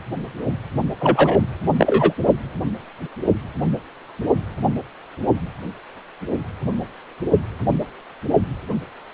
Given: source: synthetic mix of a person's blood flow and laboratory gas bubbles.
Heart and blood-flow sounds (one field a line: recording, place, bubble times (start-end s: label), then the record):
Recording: Doppler ultrasound of blood flow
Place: precordium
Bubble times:
1.01-1.40 s: bubbles
1.77-2.13 s: bubbles
From the record:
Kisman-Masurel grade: 213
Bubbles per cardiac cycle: several, 3 to 8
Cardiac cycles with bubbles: 1 to 10%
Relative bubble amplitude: loud (0.450 to 0.775)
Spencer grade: 1 (occasional bubble signal discernible with the cardiac motion signal, with majority of cardiac periods free of bubbles)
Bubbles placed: only in the low amplitude regions of the cardiac cycle